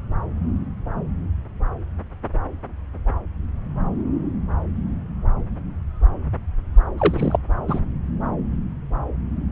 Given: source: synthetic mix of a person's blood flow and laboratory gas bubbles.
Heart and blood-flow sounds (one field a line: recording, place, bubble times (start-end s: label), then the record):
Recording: Doppler ultrasound of blood flow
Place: subclavian vein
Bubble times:
6.98-7.37 s: bubbles
7.67-7.80 s: bubbles
From the record:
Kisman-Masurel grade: 212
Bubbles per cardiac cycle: several, 3 to 8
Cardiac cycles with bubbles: 1 to 10%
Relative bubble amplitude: moderate (0.250 to 0.450)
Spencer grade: 1 (occasional bubble signal discernible with the cardiac motion signal, with majority of cardiac periods free of bubbles)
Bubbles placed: anywhere in the cardiac cycle